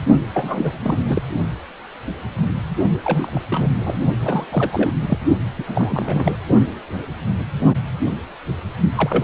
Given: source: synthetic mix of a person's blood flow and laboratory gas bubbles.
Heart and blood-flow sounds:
Doppler ultrasound of blood flow; precordium
0.34-0.79 s: bubbles
0.83-1.22 s: bubbles
3.04-3.40 s: bubbles
3.50-4.06 s: bubbles
4.21-4.46 s: bubbles
4.52-4.93 s: bubbles
5.01-5.18 s: bubbles
5.58-5.65 s: bubbles
5.67-6.36 s: bubbles
8.96-9.24 s: bubbles
From the record:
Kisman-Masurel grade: 332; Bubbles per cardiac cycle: rolling drumbeat, 9 or more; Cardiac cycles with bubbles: 50 to 99%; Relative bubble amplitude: moderate (0.250 to 0.450); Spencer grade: 3 (all of the cardiac periods contain showers or single bubble signals, but not dominating or overriding the cardiac motion signals); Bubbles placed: only in the low amplitude regions of the cardiac cycle

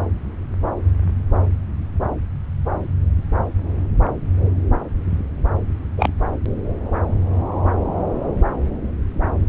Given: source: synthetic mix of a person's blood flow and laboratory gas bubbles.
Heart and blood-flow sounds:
Doppler ultrasound of blood flow; subclavian vein
5.97-6.13 s: bubbles
From the record:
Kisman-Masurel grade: 113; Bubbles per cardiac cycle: 1 to 2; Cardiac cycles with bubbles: 1 to 10%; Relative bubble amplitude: loud (0.450 to 0.775); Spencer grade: 1 (occasional bubble signal discernible with the cardiac motion signal, with majority of cardiac periods free of bubbles); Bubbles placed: anywhere in the cardiac cycle

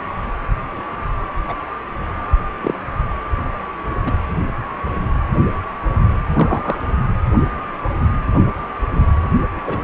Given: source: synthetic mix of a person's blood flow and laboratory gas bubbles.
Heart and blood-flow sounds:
Doppler ultrasound of blood flow; precordium
1.48-1.54 s: bubbles
2.61-2.74 s: bubbles
4.04-4.17 s: bubbles
6.35-6.81 s: bubbles
9.66-9.77 s: bubbles
From the record:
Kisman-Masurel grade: 123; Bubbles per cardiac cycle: 1 to 2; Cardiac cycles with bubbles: 10 to 50%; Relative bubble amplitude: loud (0.450 to 0.775); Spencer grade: 2 (many but less than half of the cardiac periods contain bubble signals, singularly or in groups); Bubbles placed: anywhere in the cardiac cycle

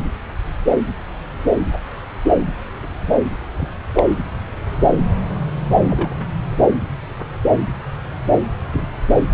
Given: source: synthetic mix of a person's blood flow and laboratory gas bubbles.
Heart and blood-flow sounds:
Doppler ultrasound of blood flow; subclavian vein
3.57-3.69 s: bubbles
3.95-4.04 s: bubbles
5.90-6.14 s: bubbles
8.71-8.88 s: bubbles
From the record:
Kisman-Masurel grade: 122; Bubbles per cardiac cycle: 1 to 2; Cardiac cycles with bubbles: 10 to 50%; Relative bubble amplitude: moderate (0.250 to 0.450); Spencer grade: 2 (many but less than half of the cardiac periods contain bubble signals, singularly or in groups); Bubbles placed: anywhere in the cardiac cycle

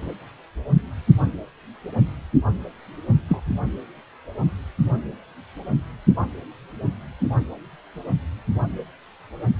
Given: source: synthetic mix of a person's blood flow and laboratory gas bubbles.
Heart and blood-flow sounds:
Doppler ultrasound of blood flow; precordium
3.28-3.43 s: bubbles
From the record:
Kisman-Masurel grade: 113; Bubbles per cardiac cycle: 1 to 2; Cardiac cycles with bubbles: 1 to 10%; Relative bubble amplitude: loud (0.450 to 0.775); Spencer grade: 1 (occasional bubble signal discernible with the cardiac motion signal, with majority of cardiac periods free of bubbles); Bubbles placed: only in the low amplitude regions of the cardiac cycle

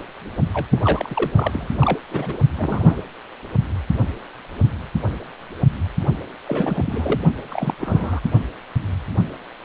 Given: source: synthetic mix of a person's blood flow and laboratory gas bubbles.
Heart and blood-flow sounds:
Doppler ultrasound of blood flow; precordium
0.54-0.66 s: bubbles
0.70-1.31 s: bubbles
1.35-2.00 s: bubbles
2.11-2.38 s: bubbles
2.58-2.99 s: bubbles
6.47-7.21 s: bubbles
7.50-7.74 s: bubbles
7.81-8.20 s: bubbles
From the record:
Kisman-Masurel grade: 232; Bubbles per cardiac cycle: several, 3 to 8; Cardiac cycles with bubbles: 50 to 99%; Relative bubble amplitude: moderate (0.250 to 0.450); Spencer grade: 3 (all of the cardiac periods contain showers or single bubble signals, but not dominating or overriding the cardiac motion signals); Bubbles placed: only in the low amplitude regions of the cardiac cycle

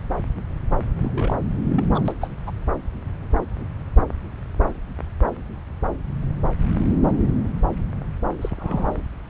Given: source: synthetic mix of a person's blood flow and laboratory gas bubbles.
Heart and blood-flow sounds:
Doppler ultrasound of blood flow; subclavian vein
0.99-1.35 s: bubbles
1.70-1.84 s: bubbles
1.94-2.12 s: bubbles
2.21-2.28 s: bubbles
2.46-2.51 s: bubbles
8.41-9.02 s: bubbles
From the record:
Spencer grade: 2 (many but less than half of the cardiac periods contain bubble signals, singularly or in groups); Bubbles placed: anywhere in the cardiac cycle

